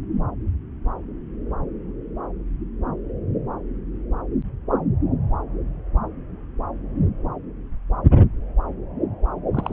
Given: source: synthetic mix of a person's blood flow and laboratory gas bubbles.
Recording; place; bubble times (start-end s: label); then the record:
Doppler ultrasound of blood flow; subclavian vein
9.54-9.73 s: bubbles
From the record:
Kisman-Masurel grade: 212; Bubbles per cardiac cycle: several, 3 to 8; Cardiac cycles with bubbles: 1 to 10%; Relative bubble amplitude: moderate (0.250 to 0.450); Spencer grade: 1 (occasional bubble signal discernible with the cardiac motion signal, with majority of cardiac periods free of bubbles); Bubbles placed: anywhere in the cardiac cycle